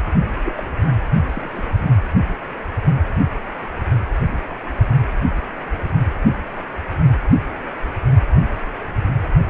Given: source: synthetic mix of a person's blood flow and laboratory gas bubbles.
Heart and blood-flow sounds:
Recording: Doppler ultrasound of blood flow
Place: precordium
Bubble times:
0.43-0.53 s: bubbles
0.56-0.63 s: bubbles
1.29-1.65 s: bubbles
From the record:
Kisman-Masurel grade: 211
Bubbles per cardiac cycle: several, 3 to 8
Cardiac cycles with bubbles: 1 to 10%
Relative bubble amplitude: barely perceptible (0.100 to 0.250)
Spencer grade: 1 (occasional bubble signal discernible with the cardiac motion signal, with majority of cardiac periods free of bubbles)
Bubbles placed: only in the low amplitude regions of the cardiac cycle

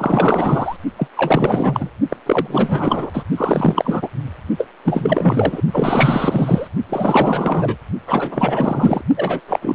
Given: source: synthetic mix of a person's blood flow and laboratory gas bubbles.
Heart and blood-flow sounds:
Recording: Doppler ultrasound of blood flow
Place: precordium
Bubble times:
0.00-0.76 s: bubbles
0.97-1.07 s: bubbles
1.17-1.90 s: bubbles
2.09-2.17 s: bubbles
2.26-3.10 s: bubbles
3.13-3.23 s: bubbles
3.37-4.08 s: bubbles
4.58-4.68 s: bubbles
4.85-5.62 s: bubbles
5.72-6.68 s: bubbles
6.89-7.77 s: bubbles
8.06-9.02 s: bubbles
9.17-9.40 s: bubbles
9.47-9.59 s: bubbles
9.62-9.75 s: bubbles
From the record:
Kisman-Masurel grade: 444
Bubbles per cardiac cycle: continuous sound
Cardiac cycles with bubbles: 100%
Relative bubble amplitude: maximal (0.775 to 0.999)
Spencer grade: 4 (maximum detectable bubble signal sounding continuously throughout systole and diastole of every cardiac period, and overriding the amplitude of the normal cardiac signals)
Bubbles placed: only in the low amplitude regions of the cardiac cycle

